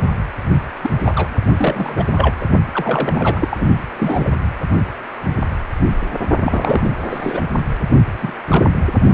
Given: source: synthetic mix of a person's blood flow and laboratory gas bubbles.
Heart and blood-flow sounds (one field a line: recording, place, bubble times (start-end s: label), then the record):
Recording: Doppler ultrasound of blood flow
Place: precordium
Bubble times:
0.82-0.90 s: bubbles
1.04-1.30 s: bubbles
1.57-2.04 s: bubbles
2.06-2.37 s: bubbles
2.41-2.47 s: bubbles
2.72-3.67 s: bubbles
3.98-4.29 s: bubbles
6.42-6.92 s: bubbles
7.09-7.41 s: bubbles
8.21-8.34 s: bubbles
8.49-8.67 s: bubbles
From the record:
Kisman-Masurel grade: 232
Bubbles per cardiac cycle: several, 3 to 8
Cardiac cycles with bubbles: 50 to 99%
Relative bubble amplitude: moderate (0.250 to 0.450)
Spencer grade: 3 (all of the cardiac periods contain showers or single bubble signals, but not dominating or overriding the cardiac motion signals)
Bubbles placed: only in the low amplitude regions of the cardiac cycle